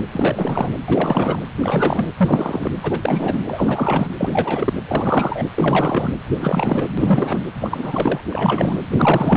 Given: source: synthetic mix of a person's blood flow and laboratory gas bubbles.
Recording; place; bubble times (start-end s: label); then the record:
Doppler ultrasound of blood flow; precordium
0.00-0.02 s: bubbles
0.12-0.73 s: bubbles
0.86-1.41 s: bubbles
1.61-2.11 s: bubbles
2.17-2.71 s: bubbles
2.82-3.43 s: bubbles
3.47-4.07 s: bubbles
4.18-4.73 s: bubbles
4.88-5.46 s: bubbles
5.56-6.14 s: bubbles
6.35-6.87 s: bubbles
6.97-7.42 s: bubbles
7.60-8.21 s: bubbles
8.29-8.83 s: bubbles
8.91-9.37 s: bubbles
From the record:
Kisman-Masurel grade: 343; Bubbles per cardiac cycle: rolling drumbeat, 9 or more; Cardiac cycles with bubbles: 100%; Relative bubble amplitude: loud (0.450 to 0.775); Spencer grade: 3 (all of the cardiac periods contain showers or single bubble signals, but not dominating or overriding the cardiac motion signals); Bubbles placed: anywhere in the cardiac cycle